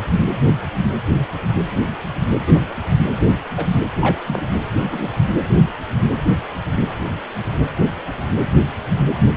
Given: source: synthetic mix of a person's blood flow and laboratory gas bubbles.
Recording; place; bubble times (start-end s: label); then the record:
Doppler ultrasound of blood flow; precordium
2.46-2.60 s: bubbles
3.56-3.65 s: bubbles
4.01-4.23 s: bubbles
4.26-4.42 s: bubbles
4.75-5.08 s: bubbles
From the record:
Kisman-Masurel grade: 122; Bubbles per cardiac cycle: 1 to 2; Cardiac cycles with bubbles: 10 to 50%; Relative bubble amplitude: moderate (0.250 to 0.450); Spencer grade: 2 (many but less than half of the cardiac periods contain bubble signals, singularly or in groups); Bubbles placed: anywhere in the cardiac cycle